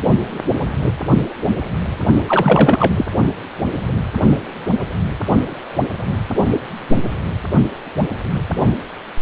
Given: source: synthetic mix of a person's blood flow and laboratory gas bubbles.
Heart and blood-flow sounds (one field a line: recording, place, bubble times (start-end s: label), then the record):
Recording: Doppler ultrasound of blood flow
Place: precordium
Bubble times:
2.27-2.93 s: bubbles
2.97-3.06 s: bubbles
From the record:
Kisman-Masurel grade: 213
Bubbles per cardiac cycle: several, 3 to 8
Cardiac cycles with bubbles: 1 to 10%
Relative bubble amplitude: loud (0.450 to 0.775)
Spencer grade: 1 (occasional bubble signal discernible with the cardiac motion signal, with majority of cardiac periods free of bubbles)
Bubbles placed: only in the low amplitude regions of the cardiac cycle